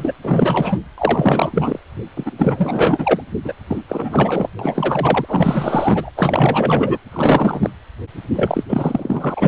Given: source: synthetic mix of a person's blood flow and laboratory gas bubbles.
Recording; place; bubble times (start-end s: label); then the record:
Doppler ultrasound of blood flow; precordium
0.00-0.13 s: bubbles
0.22-0.78 s: bubbles
0.97-1.80 s: bubbles
2.16-2.31 s: bubbles
2.38-3.22 s: bubbles
3.44-3.54 s: bubbles
3.67-3.82 s: bubbles
3.88-4.50 s: bubbles
4.59-6.10 s: bubbles
6.16-6.98 s: bubbles
7.11-7.70 s: bubbles
8.36-8.64 s: bubbles
8.69-9.48 s: bubbles
From the record:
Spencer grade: 4 (maximum detectable bubble signal sounding continuously throughout systole and diastole of every cardiac period, and overriding the amplitude of the normal cardiac signals); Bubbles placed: anywhere in the cardiac cycle